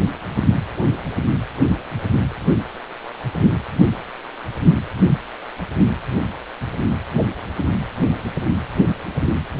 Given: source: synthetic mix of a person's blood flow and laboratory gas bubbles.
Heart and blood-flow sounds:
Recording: Doppler ultrasound of blood flow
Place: precordium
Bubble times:
9.57-9.60 s: bubbles
From the record:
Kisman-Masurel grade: 212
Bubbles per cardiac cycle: several, 3 to 8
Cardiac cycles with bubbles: 1 to 10%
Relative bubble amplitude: moderate (0.250 to 0.450)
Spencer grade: 1 (occasional bubble signal discernible with the cardiac motion signal, with majority of cardiac periods free of bubbles)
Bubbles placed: anywhere in the cardiac cycle

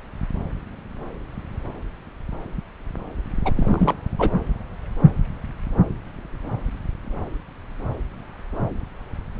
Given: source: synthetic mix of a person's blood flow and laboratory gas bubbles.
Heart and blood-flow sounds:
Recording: Doppler ultrasound of blood flow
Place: subclavian vein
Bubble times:
3.45-3.52 s: bubbles
3.56-3.94 s: bubbles
4.18-4.30 s: bubbles
From the record:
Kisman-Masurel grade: 212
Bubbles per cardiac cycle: several, 3 to 8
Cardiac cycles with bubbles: 1 to 10%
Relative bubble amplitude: moderate (0.250 to 0.450)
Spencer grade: 1 (occasional bubble signal discernible with the cardiac motion signal, with majority of cardiac periods free of bubbles)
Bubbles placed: anywhere in the cardiac cycle

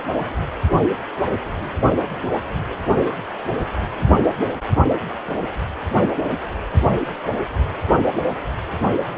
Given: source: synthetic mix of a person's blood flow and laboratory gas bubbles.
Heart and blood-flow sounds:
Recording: Doppler ultrasound of blood flow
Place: precordium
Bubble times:
4.42-4.47 s: bubbles
From the record:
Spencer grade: 1 (occasional bubble signal discernible with the cardiac motion signal, with majority of cardiac periods free of bubbles)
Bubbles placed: only in the low amplitude regions of the cardiac cycle

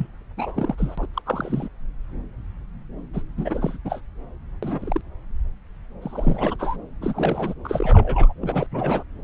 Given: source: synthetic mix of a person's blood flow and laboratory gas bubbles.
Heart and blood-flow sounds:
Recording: Doppler ultrasound of blood flow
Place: subclavian vein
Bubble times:
0.00-0.07 s: bubbles
0.37-0.75 s: bubbles
0.78-1.06 s: bubbles
1.14-1.22 s: bubbles
1.26-1.69 s: bubbles
3.13-3.22 s: bubbles
3.36-3.78 s: bubbles
3.84-4.01 s: bubbles
4.62-5.01 s: bubbles
6.01-6.56 s: bubbles
6.58-6.76 s: bubbles
7.01-7.54 s: bubbles
7.65-8.34 s: bubbles
8.42-8.67 s: bubbles
8.72-9.03 s: bubbles
From the record:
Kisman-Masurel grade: 332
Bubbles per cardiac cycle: rolling drumbeat, 9 or more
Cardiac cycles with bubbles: 50 to 99%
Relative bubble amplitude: moderate (0.250 to 0.450)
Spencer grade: 3 (all of the cardiac periods contain showers or single bubble signals, but not dominating or overriding the cardiac motion signals)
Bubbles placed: anywhere in the cardiac cycle

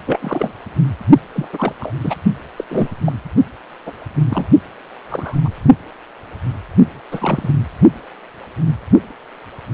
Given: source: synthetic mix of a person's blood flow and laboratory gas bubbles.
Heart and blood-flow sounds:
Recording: Doppler ultrasound of blood flow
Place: precordium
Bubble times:
0.06-0.53 s: bubbles
1.33-1.48 s: bubbles
1.52-1.73 s: bubbles
1.79-1.92 s: bubbles
2.00-2.15 s: bubbles
2.57-2.65 s: bubbles
2.69-2.88 s: bubbles
3.04-3.12 s: bubbles
3.86-3.92 s: bubbles
4.29-4.49 s: bubbles
5.08-5.39 s: bubbles
5.45-5.50 s: bubbles
7.11-7.50 s: bubbles
From the record:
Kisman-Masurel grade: 232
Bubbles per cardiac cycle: several, 3 to 8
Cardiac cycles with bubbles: 50 to 99%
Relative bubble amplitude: moderate (0.250 to 0.450)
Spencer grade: 3 (all of the cardiac periods contain showers or single bubble signals, but not dominating or overriding the cardiac motion signals)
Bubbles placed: only in the low amplitude regions of the cardiac cycle

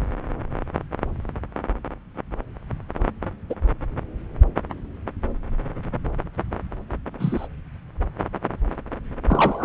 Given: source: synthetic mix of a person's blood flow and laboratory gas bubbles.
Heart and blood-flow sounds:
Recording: Doppler ultrasound of blood flow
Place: subclavian vein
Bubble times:
3.50-3.55 s: bubbles
7.19-7.47 s: bubbles
9.28-9.64 s: bubbles
From the record:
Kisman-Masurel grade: 122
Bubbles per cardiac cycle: 1 to 2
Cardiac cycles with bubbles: 10 to 50%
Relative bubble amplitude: moderate (0.250 to 0.450)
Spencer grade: 2 (many but less than half of the cardiac periods contain bubble signals, singularly or in groups)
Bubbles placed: anywhere in the cardiac cycle

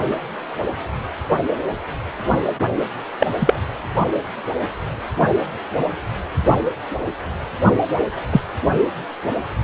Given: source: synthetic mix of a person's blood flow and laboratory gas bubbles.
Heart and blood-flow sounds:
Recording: Doppler ultrasound of blood flow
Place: precordium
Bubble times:
3.19-3.27 s: bubbles
3.39-3.60 s: bubbles
8.30-8.41 s: bubbles
From the record:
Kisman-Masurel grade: 123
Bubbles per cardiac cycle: 1 to 2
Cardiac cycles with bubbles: 10 to 50%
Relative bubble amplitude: loud (0.450 to 0.775)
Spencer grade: 2 (many but less than half of the cardiac periods contain bubble signals, singularly or in groups)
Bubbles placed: only in the low amplitude regions of the cardiac cycle

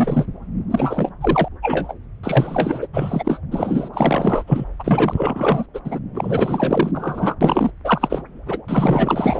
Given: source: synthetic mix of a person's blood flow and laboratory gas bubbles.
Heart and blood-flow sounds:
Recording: Doppler ultrasound of blood flow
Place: subclavian vein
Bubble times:
0.00-0.25 s: bubbles
0.70-1.12 s: bubbles
1.20-1.48 s: bubbles
1.62-1.94 s: bubbles
2.23-2.88 s: bubbles
2.93-3.40 s: bubbles
3.51-3.89 s: bubbles
3.94-4.44 s: bubbles
4.47-4.65 s: bubbles
4.79-5.66 s: bubbles
5.74-5.80 s: bubbles
5.85-5.99 s: bubbles
6.15-7.35 s: bubbles
7.41-7.71 s: bubbles
7.84-8.22 s: bubbles
8.46-8.58 s: bubbles
8.68-9.40 s: bubbles
From the record:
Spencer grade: 4 (maximum detectable bubble signal sounding continuously throughout systole and diastole of every cardiac period, and overriding the amplitude of the normal cardiac signals)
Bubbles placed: anywhere in the cardiac cycle

